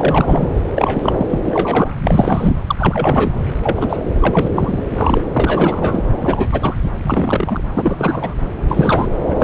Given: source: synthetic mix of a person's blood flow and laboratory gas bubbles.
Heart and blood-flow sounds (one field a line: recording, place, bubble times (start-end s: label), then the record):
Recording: Doppler ultrasound of blood flow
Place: subclavian vein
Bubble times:
0.00-0.48 s: bubbles
0.76-1.27 s: bubbles
1.30-1.39 s: bubbles
1.46-1.92 s: bubbles
2.02-2.57 s: bubbles
2.67-2.75 s: bubbles
2.78-3.32 s: bubbles
3.62-4.48 s: bubbles
4.54-4.84 s: bubbles
4.91-5.21 s: bubbles
5.36-6.02 s: bubbles
6.21-6.89 s: bubbles
7.05-7.64 s: bubbles
7.74-8.35 s: bubbles
8.68-9.08 s: bubbles
9.30-9.44 s: bubbles
From the record:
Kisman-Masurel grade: 343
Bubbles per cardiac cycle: rolling drumbeat, 9 or more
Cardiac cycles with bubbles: 100%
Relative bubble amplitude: loud (0.450 to 0.775)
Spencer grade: 3 (all of the cardiac periods contain showers or single bubble signals, but not dominating or overriding the cardiac motion signals)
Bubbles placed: anywhere in the cardiac cycle